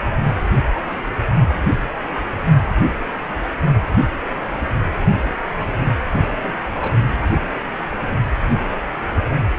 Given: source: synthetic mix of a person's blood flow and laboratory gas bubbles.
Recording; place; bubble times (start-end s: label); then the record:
Doppler ultrasound of blood flow; precordium
5.57-5.90 s: bubbles
6.14-6.23 s: bubbles
6.28-6.33 s: bubbles
6.43-6.54 s: bubbles
6.75-6.95 s: bubbles
7.23-7.29 s: bubbles
From the record:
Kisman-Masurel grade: 221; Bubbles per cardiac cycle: several, 3 to 8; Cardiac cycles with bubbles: 10 to 50%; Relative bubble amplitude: barely perceptible (0.100 to 0.250); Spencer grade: 2 (many but less than half of the cardiac periods contain bubble signals, singularly or in groups); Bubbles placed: anywhere in the cardiac cycle